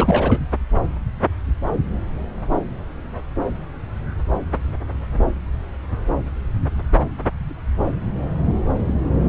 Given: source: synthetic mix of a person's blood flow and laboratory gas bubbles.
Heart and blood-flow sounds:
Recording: Doppler ultrasound of blood flow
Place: subclavian vein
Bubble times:
0.00-0.40 s: bubbles
From the record:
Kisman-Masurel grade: 223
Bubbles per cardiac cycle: several, 3 to 8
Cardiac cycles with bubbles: 10 to 50%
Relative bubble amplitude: loud (0.450 to 0.775)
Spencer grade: 2 (many but less than half of the cardiac periods contain bubble signals, singularly or in groups)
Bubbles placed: anywhere in the cardiac cycle

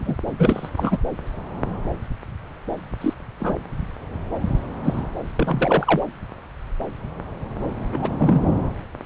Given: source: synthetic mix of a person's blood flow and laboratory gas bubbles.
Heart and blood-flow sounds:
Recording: Doppler ultrasound of blood flow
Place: subclavian vein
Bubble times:
0.00-0.17 s: bubbles
0.38-0.70 s: bubbles
0.77-0.98 s: bubbles
3.00-3.13 s: bubbles
3.40-3.55 s: bubbles
4.83-5.03 s: bubbles
5.36-6.05 s: bubbles
7.92-8.14 s: bubbles
8.18-8.41 s: bubbles
From the record:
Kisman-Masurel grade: 232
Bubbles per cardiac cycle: several, 3 to 8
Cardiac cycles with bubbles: 50 to 99%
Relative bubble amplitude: moderate (0.250 to 0.450)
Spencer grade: 3 (all of the cardiac periods contain showers or single bubble signals, but not dominating or overriding the cardiac motion signals)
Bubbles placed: anywhere in the cardiac cycle

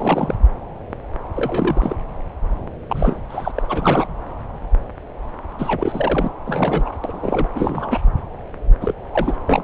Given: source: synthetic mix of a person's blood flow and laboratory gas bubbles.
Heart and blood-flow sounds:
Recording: Doppler ultrasound of blood flow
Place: subclavian vein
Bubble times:
0.00-0.35 s: bubbles
1.35-1.95 s: bubbles
2.89-3.20 s: bubbles
3.29-3.52 s: bubbles
3.54-4.06 s: bubbles
5.58-6.28 s: bubbles
6.46-6.94 s: bubbles
7.04-7.49 s: bubbles
7.55-8.00 s: bubbles
8.81-8.93 s: bubbles
9.13-9.37 s: bubbles
9.46-9.64 s: bubbles
From the record:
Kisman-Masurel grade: 232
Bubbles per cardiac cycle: several, 3 to 8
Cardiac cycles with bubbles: 50 to 99%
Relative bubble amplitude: moderate (0.250 to 0.450)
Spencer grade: 3 (all of the cardiac periods contain showers or single bubble signals, but not dominating or overriding the cardiac motion signals)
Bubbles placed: anywhere in the cardiac cycle

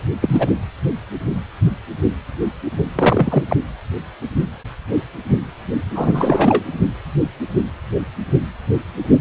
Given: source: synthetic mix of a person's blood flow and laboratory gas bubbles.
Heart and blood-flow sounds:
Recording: Doppler ultrasound of blood flow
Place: precordium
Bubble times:
0.00-0.02 s: bubbles
0.21-0.50 s: bubbles
2.95-3.44 s: bubbles
3.50-3.56 s: bubbles
5.95-6.63 s: bubbles
From the record:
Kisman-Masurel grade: 223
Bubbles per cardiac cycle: several, 3 to 8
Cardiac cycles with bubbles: 10 to 50%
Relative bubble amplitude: loud (0.450 to 0.775)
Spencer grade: 2 (many but less than half of the cardiac periods contain bubble signals, singularly or in groups)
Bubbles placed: anywhere in the cardiac cycle

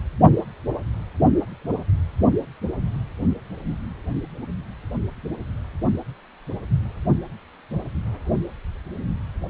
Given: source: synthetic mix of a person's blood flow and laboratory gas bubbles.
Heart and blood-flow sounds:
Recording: Doppler ultrasound of blood flow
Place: precordium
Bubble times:
no bubbles
From the record:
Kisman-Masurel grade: 000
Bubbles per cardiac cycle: 0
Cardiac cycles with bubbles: 0%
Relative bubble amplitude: no bubbles discernible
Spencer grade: 0 (complete lack of bubble signals)

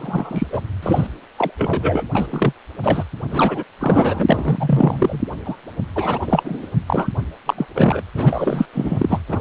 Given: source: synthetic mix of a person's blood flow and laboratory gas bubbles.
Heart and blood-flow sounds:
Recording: Doppler ultrasound of blood flow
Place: precordium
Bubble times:
0.00-0.47 s: bubbles
0.52-0.61 s: bubbles
0.82-1.07 s: bubbles
1.36-1.51 s: bubbles
1.58-2.03 s: bubbles
2.15-2.27 s: bubbles
2.31-2.53 s: bubbles
2.82-3.04 s: bubbles
3.30-3.64 s: bubbles
3.80-5.21 s: bubbles
5.45-5.55 s: bubbles
5.96-6.18 s: bubbles
6.21-6.71 s: bubbles
6.87-7.08 s: bubbles
7.46-7.54 s: bubbles
7.57-7.65 s: bubbles
7.74-8.02 s: bubbles
8.14-8.66 s: bubbles
8.72-9.21 s: bubbles
9.28-9.40 s: bubbles
From the record:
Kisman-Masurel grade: 343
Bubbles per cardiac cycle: rolling drumbeat, 9 or more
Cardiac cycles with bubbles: 100%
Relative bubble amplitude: loud (0.450 to 0.775)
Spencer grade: 3 (all of the cardiac periods contain showers or single bubble signals, but not dominating or overriding the cardiac motion signals)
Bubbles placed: anywhere in the cardiac cycle

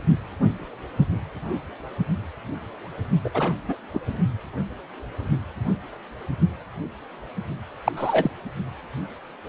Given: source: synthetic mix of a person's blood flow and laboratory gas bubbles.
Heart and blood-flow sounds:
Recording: Doppler ultrasound of blood flow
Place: precordium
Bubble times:
3.24-3.29 s: bubbles
3.34-3.54 s: bubbles
3.68-3.75 s: bubbles
3.94-4.00 s: bubbles
7.84-7.92 s: bubbles
7.96-8.30 s: bubbles
From the record:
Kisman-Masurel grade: 222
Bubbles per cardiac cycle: several, 3 to 8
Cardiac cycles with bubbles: 10 to 50%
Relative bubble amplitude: moderate (0.250 to 0.450)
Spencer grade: 2 (many but less than half of the cardiac periods contain bubble signals, singularly or in groups)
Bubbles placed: only in the low amplitude regions of the cardiac cycle

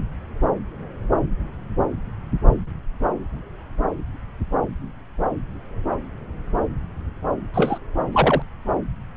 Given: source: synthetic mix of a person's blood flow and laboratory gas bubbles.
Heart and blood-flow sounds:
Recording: Doppler ultrasound of blood flow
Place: subclavian vein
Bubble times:
7.54-7.78 s: bubbles
8.12-8.42 s: bubbles
From the record:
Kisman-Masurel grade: 113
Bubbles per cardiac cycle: 1 to 2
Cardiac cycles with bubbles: 1 to 10%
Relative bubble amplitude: loud (0.450 to 0.775)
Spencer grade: 1 (occasional bubble signal discernible with the cardiac motion signal, with majority of cardiac periods free of bubbles)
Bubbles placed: anywhere in the cardiac cycle

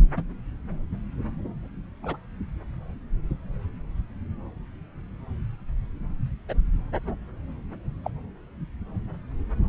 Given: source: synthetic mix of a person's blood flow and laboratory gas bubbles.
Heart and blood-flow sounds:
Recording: Doppler ultrasound of blood flow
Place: subclavian vein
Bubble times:
0.16-0.23 s: bubbles
2.02-2.17 s: bubbles
6.49-6.54 s: bubbles
8.04-8.11 s: bubbles
From the record:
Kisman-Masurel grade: 121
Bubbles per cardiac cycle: 1 to 2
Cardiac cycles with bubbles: 10 to 50%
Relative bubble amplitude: barely perceptible (0.100 to 0.250)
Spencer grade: 2 (many but less than half of the cardiac periods contain bubble signals, singularly or in groups)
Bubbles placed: anywhere in the cardiac cycle

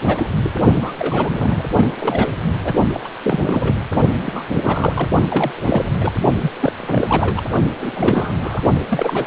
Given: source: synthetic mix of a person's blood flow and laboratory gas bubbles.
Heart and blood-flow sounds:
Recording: Doppler ultrasound of blood flow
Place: precordium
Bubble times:
0.07-0.27 s: bubbles
0.43-0.54 s: bubbles
0.74-0.92 s: bubbles
0.98-1.62 s: bubbles
1.73-1.85 s: bubbles
2.00-2.30 s: bubbles
2.65-2.73 s: bubbles
2.93-3.00 s: bubbles
3.04-3.08 s: bubbles
3.24-3.82 s: bubbles
4.26-4.44 s: bubbles
4.52-5.08 s: bubbles
5.29-5.52 s: bubbles
5.55-6.12 s: bubbles
6.42-6.50 s: bubbles
6.60-7.42 s: bubbles
7.71-8.61 s: bubbles
8.89-9.27 s: bubbles
From the record:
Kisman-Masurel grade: 342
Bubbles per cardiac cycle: rolling drumbeat, 9 or more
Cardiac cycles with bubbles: 100%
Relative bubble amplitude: moderate (0.250 to 0.450)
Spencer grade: 3 (all of the cardiac periods contain showers or single bubble signals, but not dominating or overriding the cardiac motion signals)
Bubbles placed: only in the low amplitude regions of the cardiac cycle

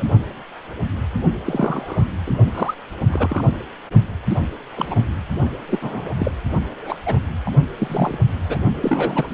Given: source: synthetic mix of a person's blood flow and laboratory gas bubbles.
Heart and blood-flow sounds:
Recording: Doppler ultrasound of blood flow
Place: precordium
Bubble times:
0.00-0.04 s: bubbles
1.45-2.05 s: bubbles
2.27-2.33 s: bubbles
2.54-2.75 s: bubbles
3.07-3.48 s: bubbles
4.29-4.38 s: bubbles
4.75-5.04 s: bubbles
5.69-5.79 s: bubbles
5.82-6.09 s: bubbles
6.18-6.32 s: bubbles
6.71-6.98 s: bubbles
7.06-7.19 s: bubbles
7.46-7.51 s: bubbles
7.78-8.18 s: bubbles
8.48-8.59 s: bubbles
8.80-9.33 s: bubbles
From the record:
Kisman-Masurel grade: 232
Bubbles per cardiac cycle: several, 3 to 8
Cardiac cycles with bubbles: 50 to 99%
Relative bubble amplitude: moderate (0.250 to 0.450)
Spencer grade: 3 (all of the cardiac periods contain showers or single bubble signals, but not dominating or overriding the cardiac motion signals)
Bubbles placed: only in the low amplitude regions of the cardiac cycle

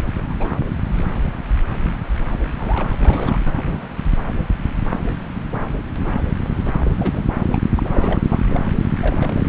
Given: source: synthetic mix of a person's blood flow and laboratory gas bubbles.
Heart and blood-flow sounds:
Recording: Doppler ultrasound of blood flow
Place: subclavian vein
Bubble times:
0.16-0.21 s: bubbles
0.29-0.34 s: bubbles
0.39-0.56 s: bubbles
0.92-1.06 s: bubbles
2.56-2.88 s: bubbles
2.91-3.40 s: bubbles
3.45-3.63 s: bubbles
3.66-3.82 s: bubbles
6.79-6.91 s: bubbles
6.98-7.25 s: bubbles
7.49-7.58 s: bubbles
7.76-8.22 s: bubbles
8.29-8.40 s: bubbles
8.48-8.61 s: bubbles
9.00-9.48 s: bubbles
From the record:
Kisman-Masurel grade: 221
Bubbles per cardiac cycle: several, 3 to 8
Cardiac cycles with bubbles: 10 to 50%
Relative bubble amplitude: barely perceptible (0.100 to 0.250)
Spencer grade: 2 (many but less than half of the cardiac periods contain bubble signals, singularly or in groups)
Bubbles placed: anywhere in the cardiac cycle

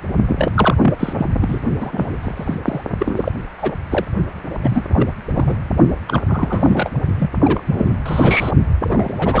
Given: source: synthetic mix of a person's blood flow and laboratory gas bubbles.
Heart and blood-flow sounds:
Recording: Doppler ultrasound of blood flow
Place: precordium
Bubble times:
0.28-0.50 s: bubbles
0.54-0.76 s: bubbles
0.81-0.94 s: bubbles
1.00-1.13 s: bubbles
1.18-1.26 s: bubbles
1.41-1.61 s: bubbles
1.80-2.17 s: bubbles
2.21-2.55 s: bubbles
2.64-2.81 s: bubbles
2.99-3.32 s: bubbles
3.58-3.76 s: bubbles
3.90-4.05 s: bubbles
4.62-4.83 s: bubbles
4.93-5.08 s: bubbles
5.29-5.56 s: bubbles
6.08-6.21 s: bubbles
6.29-6.92 s: bubbles
7.19-7.29 s: bubbles
7.38-7.63 s: bubbles
7.67-7.96 s: bubbles
8.05-8.51 s: bubbles
8.81-9.14 s: bubbles
9.17-9.40 s: bubbles
From the record:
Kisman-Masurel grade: 242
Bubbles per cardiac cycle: several, 3 to 8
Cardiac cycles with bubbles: 100%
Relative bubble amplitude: moderate (0.250 to 0.450)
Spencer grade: 3 (all of the cardiac periods contain showers or single bubble signals, but not dominating or overriding the cardiac motion signals)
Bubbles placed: only in the low amplitude regions of the cardiac cycle

